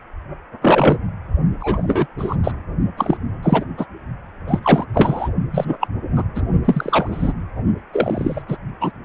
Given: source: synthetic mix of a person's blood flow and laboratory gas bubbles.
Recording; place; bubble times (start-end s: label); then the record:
Doppler ultrasound of blood flow; precordium
0.61-0.98 s: bubbles
1.60-2.06 s: bubbles
2.17-2.36 s: bubbles
2.44-2.51 s: bubbles
2.97-3.17 s: bubbles
3.42-3.65 s: bubbles
3.77-3.86 s: bubbles
4.48-4.60 s: bubbles
4.62-4.85 s: bubbles
4.94-5.29 s: bubbles
5.52-5.78 s: bubbles
5.80-5.88 s: bubbles
6.15-6.24 s: bubbles
6.35-6.42 s: bubbles
6.65-7.33 s: bubbles
7.93-8.43 s: bubbles
8.48-8.56 s: bubbles
8.80-8.92 s: bubbles
From the record:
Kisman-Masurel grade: 243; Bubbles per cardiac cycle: several, 3 to 8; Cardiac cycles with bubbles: 100%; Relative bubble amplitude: loud (0.450 to 0.775); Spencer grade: 3 (all of the cardiac periods contain showers or single bubble signals, but not dominating or overriding the cardiac motion signals); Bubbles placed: only in the low amplitude regions of the cardiac cycle